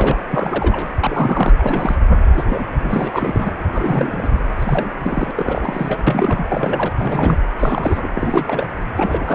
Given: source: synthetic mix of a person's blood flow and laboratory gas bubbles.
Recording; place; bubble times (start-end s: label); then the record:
Doppler ultrasound of blood flow; precordium
0.00-0.17 s: bubbles
0.28-0.89 s: bubbles
1.00-1.96 s: bubbles
2.35-2.44 s: bubbles
2.49-2.67 s: bubbles
2.83-3.51 s: bubbles
3.73-4.30 s: bubbles
4.59-4.91 s: bubbles
5.00-5.31 s: bubbles
5.36-5.98 s: bubbles
6.07-6.46 s: bubbles
6.51-6.92 s: bubbles
6.98-7.38 s: bubbles
7.59-8.08 s: bubbles
8.13-8.69 s: bubbles
8.96-9.35 s: bubbles
From the record:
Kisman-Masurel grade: 342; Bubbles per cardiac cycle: rolling drumbeat, 9 or more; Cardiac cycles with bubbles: 100%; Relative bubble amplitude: moderate (0.250 to 0.450); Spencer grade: 3 (all of the cardiac periods contain showers or single bubble signals, but not dominating or overriding the cardiac motion signals); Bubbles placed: anywhere in the cardiac cycle